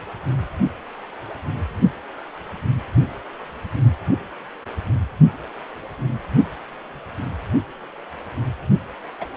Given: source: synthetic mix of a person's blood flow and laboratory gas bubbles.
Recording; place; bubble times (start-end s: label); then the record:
Doppler ultrasound of blood flow; precordium
9.21-9.25 s: bubbles
From the record:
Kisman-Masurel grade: 122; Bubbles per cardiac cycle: 1 to 2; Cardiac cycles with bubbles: 10 to 50%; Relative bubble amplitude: moderate (0.250 to 0.450); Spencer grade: 2 (many but less than half of the cardiac periods contain bubble signals, singularly or in groups); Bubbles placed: only in the low amplitude regions of the cardiac cycle